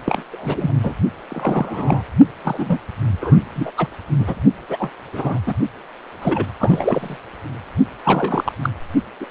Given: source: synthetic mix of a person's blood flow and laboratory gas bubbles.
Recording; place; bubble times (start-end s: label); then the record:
Doppler ultrasound of blood flow; precordium
0.04-0.22 s: bubbles
0.32-0.71 s: bubbles
0.83-0.94 s: bubbles
1.29-2.03 s: bubbles
2.44-2.78 s: bubbles
3.21-3.38 s: bubbles
3.55-3.71 s: bubbles
3.77-3.88 s: bubbles
4.18-4.39 s: bubbles
4.69-4.90 s: bubbles
5.12-5.39 s: bubbles
5.46-5.55 s: bubbles
6.21-6.46 s: bubbles
6.59-7.17 s: bubbles
8.04-8.53 s: bubbles
8.62-8.70 s: bubbles
9.20-9.26 s: bubbles
From the record:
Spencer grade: 3 (all of the cardiac periods contain showers or single bubble signals, but not dominating or overriding the cardiac motion signals); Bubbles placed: only in the low amplitude regions of the cardiac cycle